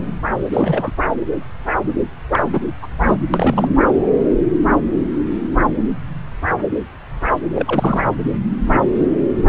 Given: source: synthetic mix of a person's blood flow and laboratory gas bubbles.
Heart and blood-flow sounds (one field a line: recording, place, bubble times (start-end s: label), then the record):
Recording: Doppler ultrasound of blood flow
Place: subclavian vein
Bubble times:
0.52-0.92 s: bubbles
2.31-2.60 s: bubbles
2.82-2.87 s: bubbles
3.06-3.17 s: bubbles
3.33-3.68 s: bubbles
7.56-8.03 s: bubbles
From the record:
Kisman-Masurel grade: 222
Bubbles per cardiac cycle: several, 3 to 8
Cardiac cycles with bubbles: 10 to 50%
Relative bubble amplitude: moderate (0.250 to 0.450)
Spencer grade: 2 (many but less than half of the cardiac periods contain bubble signals, singularly or in groups)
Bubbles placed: anywhere in the cardiac cycle